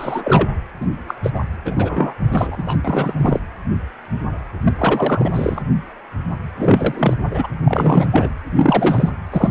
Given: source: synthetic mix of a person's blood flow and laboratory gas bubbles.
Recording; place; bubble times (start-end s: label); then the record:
Doppler ultrasound of blood flow; precordium
0.00-0.22 s: bubbles
0.24-0.48 s: bubbles
0.80-0.86 s: bubbles
1.07-1.14 s: bubbles
1.23-1.31 s: bubbles
1.34-1.40 s: bubbles
1.65-2.14 s: bubbles
2.31-2.79 s: bubbles
2.85-3.14 s: bubbles
3.19-3.40 s: bubbles
4.64-5.30 s: bubbles
5.33-5.62 s: bubbles
6.56-7.13 s: bubbles
7.30-7.47 s: bubbles
7.64-8.30 s: bubbles
8.55-9.10 s: bubbles
9.32-9.51 s: bubbles
From the record:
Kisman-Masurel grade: 333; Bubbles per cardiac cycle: rolling drumbeat, 9 or more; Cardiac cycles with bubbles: 50 to 99%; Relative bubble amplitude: loud (0.450 to 0.775); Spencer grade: 3 (all of the cardiac periods contain showers or single bubble signals, but not dominating or overriding the cardiac motion signals); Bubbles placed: anywhere in the cardiac cycle